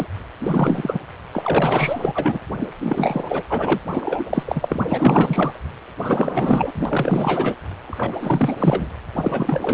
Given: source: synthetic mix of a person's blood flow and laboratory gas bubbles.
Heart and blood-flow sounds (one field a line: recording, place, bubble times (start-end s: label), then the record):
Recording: Doppler ultrasound of blood flow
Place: precordium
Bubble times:
0.00-0.07 s: bubbles
0.41-0.99 s: bubbles
1.33-2.40 s: bubbles
2.60-2.71 s: bubbles
2.80-3.43 s: bubbles
3.50-3.80 s: bubbles
3.90-4.25 s: bubbles
4.29-4.43 s: bubbles
4.46-4.83 s: bubbles
4.88-5.59 s: bubbles
5.99-6.71 s: bubbles
6.75-6.86 s: bubbles
6.89-7.55 s: bubbles
7.87-8.16 s: bubbles
8.20-8.55 s: bubbles
8.60-8.89 s: bubbles
9.16-9.73 s: bubbles
From the record:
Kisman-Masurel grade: 444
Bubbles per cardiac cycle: continuous sound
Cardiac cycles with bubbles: 100%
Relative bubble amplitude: maximal (0.775 to 0.999)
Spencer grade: 4 (maximum detectable bubble signal sounding continuously throughout systole and diastole of every cardiac period, and overriding the amplitude of the normal cardiac signals)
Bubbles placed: anywhere in the cardiac cycle